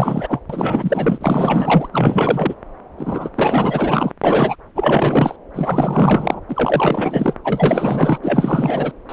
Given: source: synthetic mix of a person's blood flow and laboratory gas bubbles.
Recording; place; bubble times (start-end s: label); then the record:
Doppler ultrasound of blood flow; subclavian vein
0.00-0.39 s: bubbles
0.49-1.89 s: bubbles
1.92-2.54 s: bubbles
2.98-3.29 s: bubbles
3.35-4.12 s: bubbles
4.24-4.55 s: bubbles
4.75-5.36 s: bubbles
5.54-6.41 s: bubbles
6.49-7.33 s: bubbles
7.44-8.18 s: bubbles
8.22-8.92 s: bubbles
9.08-9.13 s: bubbles
From the record:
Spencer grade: 4 (maximum detectable bubble signal sounding continuously throughout systole and diastole of every cardiac period, and overriding the amplitude of the normal cardiac signals); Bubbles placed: anywhere in the cardiac cycle